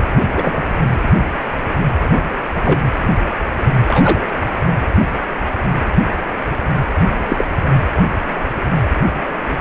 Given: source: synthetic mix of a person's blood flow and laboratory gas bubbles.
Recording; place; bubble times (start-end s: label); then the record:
Doppler ultrasound of blood flow; precordium
0.27-0.65 s: bubbles
2.65-2.80 s: bubbles
3.85-4.25 s: bubbles
7.28-7.45 s: bubbles
From the record:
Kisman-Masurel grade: 123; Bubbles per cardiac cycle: 1 to 2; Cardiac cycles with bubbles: 10 to 50%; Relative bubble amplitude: loud (0.450 to 0.775); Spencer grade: 2 (many but less than half of the cardiac periods contain bubble signals, singularly or in groups); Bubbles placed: anywhere in the cardiac cycle